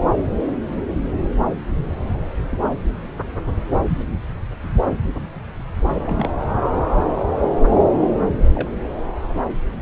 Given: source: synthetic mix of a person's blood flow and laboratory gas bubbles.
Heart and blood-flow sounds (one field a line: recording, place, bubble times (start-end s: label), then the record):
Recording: Doppler ultrasound of blood flow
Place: subclavian vein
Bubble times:
2.51-2.58 s: bubbles
3.88-4.03 s: bubbles
6.05-6.32 s: bubbles
8.55-8.68 s: bubbles
From the record:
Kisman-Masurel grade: 121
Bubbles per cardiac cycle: 1 to 2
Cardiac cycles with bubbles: 10 to 50%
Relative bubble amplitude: barely perceptible (0.100 to 0.250)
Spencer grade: 2 (many but less than half of the cardiac periods contain bubble signals, singularly or in groups)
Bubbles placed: anywhere in the cardiac cycle